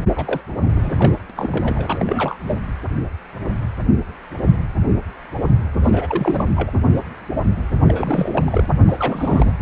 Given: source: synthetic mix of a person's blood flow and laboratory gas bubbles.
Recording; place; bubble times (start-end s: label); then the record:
Doppler ultrasound of blood flow; precordium
0.16-0.41 s: bubbles
0.66-1.20 s: bubbles
1.29-1.32 s: bubbles
1.36-2.37 s: bubbles
2.45-2.56 s: bubbles
5.83-6.50 s: bubbles
6.56-6.71 s: bubbles
7.88-8.66 s: bubbles
8.88-9.52 s: bubbles
From the record:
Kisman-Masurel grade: 332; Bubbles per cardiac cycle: rolling drumbeat, 9 or more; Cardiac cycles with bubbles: 50 to 99%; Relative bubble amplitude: moderate (0.250 to 0.450); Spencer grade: 3 (all of the cardiac periods contain showers or single bubble signals, but not dominating or overriding the cardiac motion signals); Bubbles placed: anywhere in the cardiac cycle